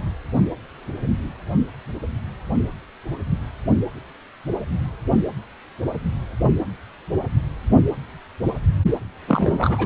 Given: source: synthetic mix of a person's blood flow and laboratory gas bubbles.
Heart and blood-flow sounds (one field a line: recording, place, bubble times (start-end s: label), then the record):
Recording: Doppler ultrasound of blood flow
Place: precordium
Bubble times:
9.28-9.86 s: bubbles
From the record:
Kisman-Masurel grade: 212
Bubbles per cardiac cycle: several, 3 to 8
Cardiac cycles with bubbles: 1 to 10%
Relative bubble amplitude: moderate (0.250 to 0.450)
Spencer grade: 1 (occasional bubble signal discernible with the cardiac motion signal, with majority of cardiac periods free of bubbles)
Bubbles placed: only in the low amplitude regions of the cardiac cycle